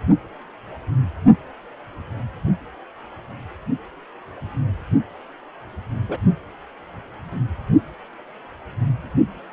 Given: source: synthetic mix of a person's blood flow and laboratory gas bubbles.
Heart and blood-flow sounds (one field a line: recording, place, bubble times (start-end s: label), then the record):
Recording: Doppler ultrasound of blood flow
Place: precordium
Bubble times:
6.08-6.17 s: bubbles
From the record:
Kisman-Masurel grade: 112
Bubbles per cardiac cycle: 1 to 2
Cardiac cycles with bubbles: 1 to 10%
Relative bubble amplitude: moderate (0.250 to 0.450)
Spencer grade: 1 (occasional bubble signal discernible with the cardiac motion signal, with majority of cardiac periods free of bubbles)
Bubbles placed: only in the low amplitude regions of the cardiac cycle